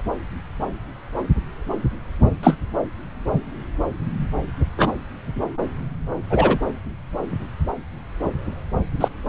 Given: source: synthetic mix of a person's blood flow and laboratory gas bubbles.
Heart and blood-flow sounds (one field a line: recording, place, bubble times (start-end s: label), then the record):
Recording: Doppler ultrasound of blood flow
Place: subclavian vein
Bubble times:
0.00-0.02 s: bubbles
2.43-2.57 s: bubbles
4.77-4.93 s: bubbles
6.29-6.58 s: bubbles
9.00-9.08 s: bubbles
From the record:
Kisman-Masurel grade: 123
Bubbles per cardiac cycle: 1 to 2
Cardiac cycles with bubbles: 10 to 50%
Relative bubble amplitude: loud (0.450 to 0.775)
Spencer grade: 2 (many but less than half of the cardiac periods contain bubble signals, singularly or in groups)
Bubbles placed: anywhere in the cardiac cycle